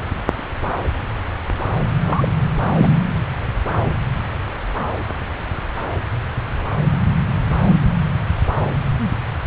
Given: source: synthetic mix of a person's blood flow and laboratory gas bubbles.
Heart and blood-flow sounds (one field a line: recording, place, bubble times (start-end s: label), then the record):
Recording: Doppler ultrasound of blood flow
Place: subclavian vein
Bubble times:
2.04-2.31 s: bubbles
2.77-2.90 s: bubbles
From the record:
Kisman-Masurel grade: 212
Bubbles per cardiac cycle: several, 3 to 8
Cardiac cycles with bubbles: 1 to 10%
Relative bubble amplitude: moderate (0.250 to 0.450)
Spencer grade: 1 (occasional bubble signal discernible with the cardiac motion signal, with majority of cardiac periods free of bubbles)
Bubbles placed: anywhere in the cardiac cycle